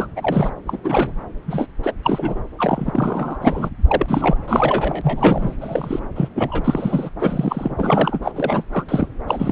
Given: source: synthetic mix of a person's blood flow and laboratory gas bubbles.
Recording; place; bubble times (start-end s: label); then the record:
Doppler ultrasound of blood flow; subclavian vein
0.00-0.07 s: bubbles
0.16-0.51 s: bubbles
0.66-0.78 s: bubbles
0.84-1.12 s: bubbles
1.48-1.67 s: bubbles
1.83-1.92 s: bubbles
2.02-2.40 s: bubbles
2.58-3.38 s: bubbles
3.41-3.70 s: bubbles
3.87-4.36 s: bubbles
4.47-5.55 s: bubbles
5.61-6.00 s: bubbles
6.16-6.29 s: bubbles
6.35-7.10 s: bubbles
7.20-8.20 s: bubbles
8.22-8.31 s: bubbles
8.34-8.63 s: bubbles
8.72-8.84 s: bubbles
8.88-9.07 s: bubbles
9.26-9.51 s: bubbles
From the record:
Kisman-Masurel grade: 242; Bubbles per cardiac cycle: several, 3 to 8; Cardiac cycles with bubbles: 100%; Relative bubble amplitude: moderate (0.250 to 0.450); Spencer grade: 3 (all of the cardiac periods contain showers or single bubble signals, but not dominating or overriding the cardiac motion signals); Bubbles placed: anywhere in the cardiac cycle